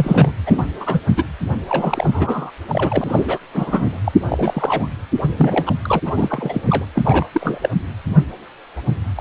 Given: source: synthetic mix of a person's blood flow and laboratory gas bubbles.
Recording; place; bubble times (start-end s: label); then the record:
Doppler ultrasound of blood flow; precordium
0.00-0.33 s: bubbles
0.46-0.65 s: bubbles
0.80-1.01 s: bubbles
1.08-1.24 s: bubbles
1.69-2.51 s: bubbles
2.69-3.39 s: bubbles
3.53-3.99 s: bubbles
4.04-4.12 s: bubbles
4.21-4.88 s: bubbles
5.21-5.72 s: bubbles
5.82-5.99 s: bubbles
6.05-6.12 s: bubbles
6.17-6.62 s: bubbles
6.66-6.86 s: bubbles
6.95-7.27 s: bubbles
7.32-7.59 s: bubbles
7.62-7.69 s: bubbles
9.15-9.21 s: bubbles
From the record:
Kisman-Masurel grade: 332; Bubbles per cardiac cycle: rolling drumbeat, 9 or more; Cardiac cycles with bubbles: 50 to 99%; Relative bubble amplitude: moderate (0.250 to 0.450); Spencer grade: 3 (all of the cardiac periods contain showers or single bubble signals, but not dominating or overriding the cardiac motion signals); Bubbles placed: anywhere in the cardiac cycle